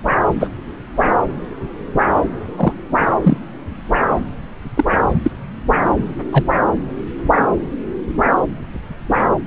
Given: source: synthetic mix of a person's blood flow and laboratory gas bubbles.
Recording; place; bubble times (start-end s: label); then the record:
Doppler ultrasound of blood flow; subclavian vein
0.40-0.49 s: bubbles
2.56-2.73 s: bubbles
3.23-3.38 s: bubbles
4.75-4.85 s: bubbles
5.24-5.31 s: bubbles
6.32-6.43 s: bubbles
From the record:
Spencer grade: 2 (many but less than half of the cardiac periods contain bubble signals, singularly or in groups); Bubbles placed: anywhere in the cardiac cycle